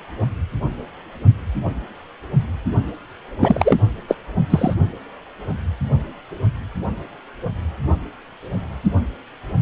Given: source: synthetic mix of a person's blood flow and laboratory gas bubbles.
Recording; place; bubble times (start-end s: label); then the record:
Doppler ultrasound of blood flow; precordium
3.41-3.77 s: bubbles
4.08-4.16 s: bubbles
4.50-4.74 s: bubbles
From the record:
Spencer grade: 2 (many but less than half of the cardiac periods contain bubble signals, singularly or in groups); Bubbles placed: only in the low amplitude regions of the cardiac cycle